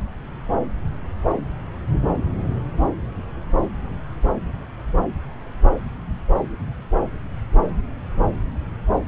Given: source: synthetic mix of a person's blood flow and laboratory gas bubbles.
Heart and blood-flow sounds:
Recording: Doppler ultrasound of blood flow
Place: subclavian vein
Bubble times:
no bubbles
From the record:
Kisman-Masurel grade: 000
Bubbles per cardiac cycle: 0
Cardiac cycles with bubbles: 0%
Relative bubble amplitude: no bubbles discernible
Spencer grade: 0 (complete lack of bubble signals)

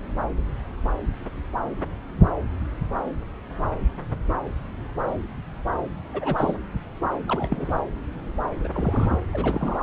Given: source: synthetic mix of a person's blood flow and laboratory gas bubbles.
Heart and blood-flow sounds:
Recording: Doppler ultrasound of blood flow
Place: subclavian vein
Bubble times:
6.13-6.54 s: bubbles
7.28-7.71 s: bubbles
8.63-8.67 s: bubbles
8.74-9.26 s: bubbles
9.33-9.78 s: bubbles
From the record:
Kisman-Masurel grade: 221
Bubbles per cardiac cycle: several, 3 to 8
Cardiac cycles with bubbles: 10 to 50%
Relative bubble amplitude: barely perceptible (0.100 to 0.250)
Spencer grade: 2 (many but less than half of the cardiac periods contain bubble signals, singularly or in groups)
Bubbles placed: anywhere in the cardiac cycle

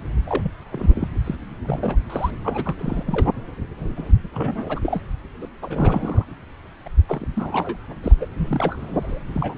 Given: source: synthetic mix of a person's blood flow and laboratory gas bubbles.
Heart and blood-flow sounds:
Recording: Doppler ultrasound of blood flow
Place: subclavian vein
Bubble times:
0.27-0.51 s: bubbles
0.71-1.08 s: bubbles
1.24-1.35 s: bubbles
1.65-1.96 s: bubbles
2.10-2.31 s: bubbles
2.44-2.75 s: bubbles
2.78-3.29 s: bubbles
3.78-4.12 s: bubbles
4.34-4.79 s: bubbles
4.83-5.02 s: bubbles
5.42-5.46 s: bubbles
5.62-6.25 s: bubbles
6.86-6.88 s: bubbles
7.07-7.26 s: bubbles
7.33-7.77 s: bubbles
8.03-8.12 s: bubbles
8.20-8.26 s: bubbles
8.38-9.21 s: bubbles
9.32-9.58 s: bubbles
From the record:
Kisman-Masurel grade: 342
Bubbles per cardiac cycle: rolling drumbeat, 9 or more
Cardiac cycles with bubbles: 100%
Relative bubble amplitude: moderate (0.250 to 0.450)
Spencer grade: 3 (all of the cardiac periods contain showers or single bubble signals, but not dominating or overriding the cardiac motion signals)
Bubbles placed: anywhere in the cardiac cycle

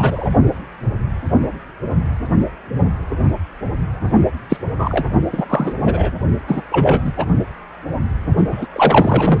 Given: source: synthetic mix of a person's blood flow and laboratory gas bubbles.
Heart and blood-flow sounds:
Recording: Doppler ultrasound of blood flow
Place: precordium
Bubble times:
0.00-0.29 s: bubbles
4.49-4.57 s: bubbles
4.78-5.04 s: bubbles
5.33-5.45 s: bubbles
5.49-5.75 s: bubbles
5.85-6.10 s: bubbles
6.47-6.62 s: bubbles
6.71-7.13 s: bubbles
7.17-7.25 s: bubbles
8.38-8.44 s: bubbles
8.52-8.67 s: bubbles
8.73-9.40 s: bubbles
From the record:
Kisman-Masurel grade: 233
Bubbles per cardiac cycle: several, 3 to 8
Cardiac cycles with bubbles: 50 to 99%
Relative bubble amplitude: loud (0.450 to 0.775)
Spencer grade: 3 (all of the cardiac periods contain showers or single bubble signals, but not dominating or overriding the cardiac motion signals)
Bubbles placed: only in the low amplitude regions of the cardiac cycle

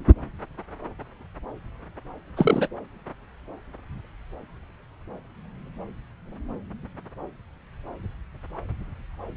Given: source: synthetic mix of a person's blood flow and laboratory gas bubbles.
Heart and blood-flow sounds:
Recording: Doppler ultrasound of blood flow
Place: subclavian vein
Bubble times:
2.36-2.68 s: bubbles
From the record:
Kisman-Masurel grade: 213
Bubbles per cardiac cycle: several, 3 to 8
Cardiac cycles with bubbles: 1 to 10%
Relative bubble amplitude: loud (0.450 to 0.775)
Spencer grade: 1 (occasional bubble signal discernible with the cardiac motion signal, with majority of cardiac periods free of bubbles)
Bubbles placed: anywhere in the cardiac cycle

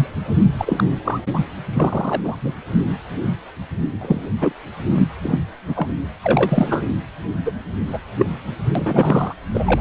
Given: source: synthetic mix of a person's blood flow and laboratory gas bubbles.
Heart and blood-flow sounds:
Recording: Doppler ultrasound of blood flow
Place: precordium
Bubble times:
0.00-0.07 s: bubbles
0.57-0.83 s: bubbles
1.04-1.19 s: bubbles
1.33-1.40 s: bubbles
1.73-2.35 s: bubbles
2.41-2.53 s: bubbles
4.01-4.21 s: bubbles
4.40-4.52 s: bubbles
4.95-5.08 s: bubbles
5.22-5.38 s: bubbles
5.67-5.88 s: bubbles
6.05-6.08 s: bubbles
6.24-6.83 s: bubbles
7.45-7.52 s: bubbles
7.87-7.99 s: bubbles
8.18-8.26 s: bubbles
8.75-9.34 s: bubbles
9.54-9.81 s: bubbles
From the record:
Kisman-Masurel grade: 233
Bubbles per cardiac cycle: several, 3 to 8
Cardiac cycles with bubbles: 50 to 99%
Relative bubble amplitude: loud (0.450 to 0.775)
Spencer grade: 3 (all of the cardiac periods contain showers or single bubble signals, but not dominating or overriding the cardiac motion signals)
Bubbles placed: anywhere in the cardiac cycle

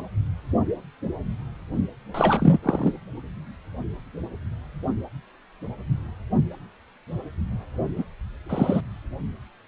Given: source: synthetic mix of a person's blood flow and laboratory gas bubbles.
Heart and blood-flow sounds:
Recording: Doppler ultrasound of blood flow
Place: precordium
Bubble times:
2.14-2.59 s: bubbles
2.62-2.94 s: bubbles
7.96-8.05 s: bubbles
8.49-8.81 s: bubbles
From the record:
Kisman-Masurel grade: 222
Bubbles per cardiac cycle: several, 3 to 8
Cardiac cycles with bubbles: 10 to 50%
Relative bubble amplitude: moderate (0.250 to 0.450)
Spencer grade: 2 (many but less than half of the cardiac periods contain bubble signals, singularly or in groups)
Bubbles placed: only in the low amplitude regions of the cardiac cycle

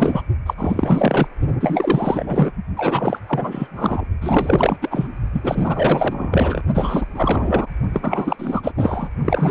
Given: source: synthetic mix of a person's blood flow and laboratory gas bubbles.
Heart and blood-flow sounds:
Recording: Doppler ultrasound of blood flow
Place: precordium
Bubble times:
0.00-0.22 s: bubbles
0.46-0.54 s: bubbles
0.57-1.27 s: bubbles
1.60-2.51 s: bubbles
2.76-3.19 s: bubbles
3.28-3.67 s: bubbles
3.71-4.05 s: bubbles
4.21-5.07 s: bubbles
5.32-6.62 s: bubbles
6.74-7.06 s: bubbles
7.15-7.67 s: bubbles
7.93-8.72 s: bubbles
8.77-9.09 s: bubbles
9.25-9.51 s: bubbles
From the record:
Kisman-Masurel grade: 444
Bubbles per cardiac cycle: continuous sound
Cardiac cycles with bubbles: 100%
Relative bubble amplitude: maximal (0.775 to 0.999)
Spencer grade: 4 (maximum detectable bubble signal sounding continuously throughout systole and diastole of every cardiac period, and overriding the amplitude of the normal cardiac signals)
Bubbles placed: only in the low amplitude regions of the cardiac cycle

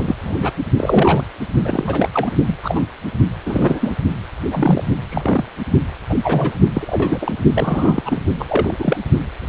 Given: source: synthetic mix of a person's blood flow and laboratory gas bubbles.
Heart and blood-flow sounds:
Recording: Doppler ultrasound of blood flow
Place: precordium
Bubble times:
0.00-0.15 s: bubbles
0.21-0.52 s: bubbles
0.77-1.23 s: bubbles
1.62-2.08 s: bubbles
2.12-2.31 s: bubbles
2.46-2.56 s: bubbles
2.62-2.82 s: bubbles
3.44-3.94 s: bubbles
4.50-4.85 s: bubbles
5.09-5.45 s: bubbles
6.09-6.17 s: bubbles
6.24-6.56 s: bubbles
6.74-7.34 s: bubbles
7.54-8.03 s: bubbles
8.05-8.21 s: bubbles
8.39-8.46 s: bubbles
8.49-8.72 s: bubbles
8.79-8.97 s: bubbles
9.40-9.48 s: bubbles
From the record:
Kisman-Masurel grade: 242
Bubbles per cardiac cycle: several, 3 to 8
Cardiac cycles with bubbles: 100%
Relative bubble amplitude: moderate (0.250 to 0.450)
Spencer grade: 3 (all of the cardiac periods contain showers or single bubble signals, but not dominating or overriding the cardiac motion signals)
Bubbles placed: only in the low amplitude regions of the cardiac cycle

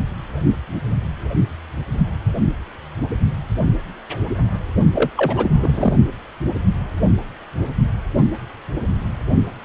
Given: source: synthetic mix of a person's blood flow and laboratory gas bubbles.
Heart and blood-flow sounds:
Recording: Doppler ultrasound of blood flow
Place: precordium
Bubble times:
4.95-5.10 s: bubbles
5.17-5.93 s: bubbles
From the record:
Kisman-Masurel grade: 212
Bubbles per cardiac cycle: several, 3 to 8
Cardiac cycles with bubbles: 1 to 10%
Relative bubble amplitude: moderate (0.250 to 0.450)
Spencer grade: 1 (occasional bubble signal discernible with the cardiac motion signal, with majority of cardiac periods free of bubbles)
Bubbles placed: only in the low amplitude regions of the cardiac cycle

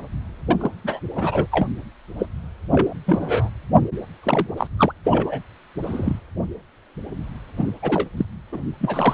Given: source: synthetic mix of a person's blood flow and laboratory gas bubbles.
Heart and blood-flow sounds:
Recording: Doppler ultrasound of blood flow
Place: precordium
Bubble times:
0.48-0.70 s: bubbles
0.84-1.00 s: bubbles
1.15-1.46 s: bubbles
1.52-1.67 s: bubbles
2.19-2.27 s: bubbles
2.72-2.93 s: bubbles
3.06-3.50 s: bubbles
4.23-4.47 s: bubbles
4.57-4.67 s: bubbles
4.77-4.92 s: bubbles
5.04-5.41 s: bubbles
5.83-6.20 s: bubbles
7.56-7.72 s: bubbles
7.82-8.08 s: bubbles
8.16-8.25 s: bubbles
8.52-8.61 s: bubbles
8.80-9.14 s: bubbles
From the record:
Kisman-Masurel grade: 232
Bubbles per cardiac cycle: several, 3 to 8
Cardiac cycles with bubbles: 50 to 99%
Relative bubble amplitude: moderate (0.250 to 0.450)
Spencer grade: 3 (all of the cardiac periods contain showers or single bubble signals, but not dominating or overriding the cardiac motion signals)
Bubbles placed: anywhere in the cardiac cycle

